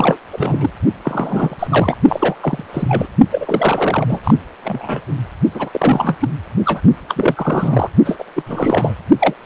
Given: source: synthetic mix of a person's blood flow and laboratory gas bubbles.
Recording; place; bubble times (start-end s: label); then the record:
Doppler ultrasound of blood flow; precordium
0.00-0.17 s: bubbles
0.32-0.70 s: bubbles
1.04-1.97 s: bubbles
2.08-2.35 s: bubbles
2.40-2.64 s: bubbles
2.73-3.07 s: bubbles
3.31-4.34 s: bubbles
4.63-5.01 s: bubbles
5.54-6.17 s: bubbles
6.20-6.29 s: bubbles
6.65-6.80 s: bubbles
7.08-7.89 s: bubbles
8.04-8.24 s: bubbles
8.36-8.42 s: bubbles
8.46-8.94 s: bubbles
9.20-9.36 s: bubbles
9.43-9.46 s: bubbles
From the record:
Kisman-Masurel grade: 343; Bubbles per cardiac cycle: rolling drumbeat, 9 or more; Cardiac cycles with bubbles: 100%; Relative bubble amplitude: loud (0.450 to 0.775); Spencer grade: 3 (all of the cardiac periods contain showers or single bubble signals, but not dominating or overriding the cardiac motion signals); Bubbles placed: only in the low amplitude regions of the cardiac cycle